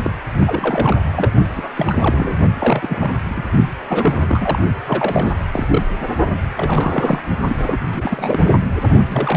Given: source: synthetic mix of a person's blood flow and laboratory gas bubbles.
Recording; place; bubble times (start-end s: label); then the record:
Doppler ultrasound of blood flow; precordium
0.03-0.11 s: bubbles
0.39-0.97 s: bubbles
1.12-1.30 s: bubbles
1.53-1.73 s: bubbles
1.76-2.35 s: bubbles
2.59-3.12 s: bubbles
3.28-3.43 s: bubbles
3.89-4.59 s: bubbles
4.86-5.38 s: bubbles
5.52-5.82 s: bubbles
6.56-7.21 s: bubbles
7.47-7.79 s: bubbles
7.92-8.44 s: bubbles
9.04-9.37 s: bubbles
From the record:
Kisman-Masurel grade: 342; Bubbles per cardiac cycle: rolling drumbeat, 9 or more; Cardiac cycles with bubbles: 100%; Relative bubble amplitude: moderate (0.250 to 0.450); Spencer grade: 3 (all of the cardiac periods contain showers or single bubble signals, but not dominating or overriding the cardiac motion signals); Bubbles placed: only in the low amplitude regions of the cardiac cycle